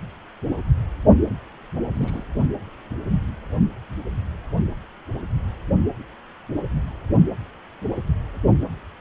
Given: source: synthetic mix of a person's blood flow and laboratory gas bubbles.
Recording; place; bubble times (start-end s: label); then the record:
Doppler ultrasound of blood flow; precordium
1.89-2.23 s: bubbles
From the record:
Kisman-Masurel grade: 121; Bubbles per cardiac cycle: 1 to 2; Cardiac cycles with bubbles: 10 to 50%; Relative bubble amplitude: barely perceptible (0.100 to 0.250); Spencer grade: 2 (many but less than half of the cardiac periods contain bubble signals, singularly or in groups); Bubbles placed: only in the low amplitude regions of the cardiac cycle